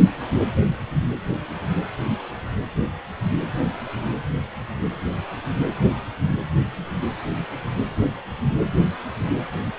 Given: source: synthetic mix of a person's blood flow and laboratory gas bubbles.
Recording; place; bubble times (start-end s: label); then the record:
Doppler ultrasound of blood flow; precordium
no bubbles
From the record:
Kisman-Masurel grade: 000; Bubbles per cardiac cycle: 0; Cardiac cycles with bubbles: 0%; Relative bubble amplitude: no bubbles discernible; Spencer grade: 0 (complete lack of bubble signals)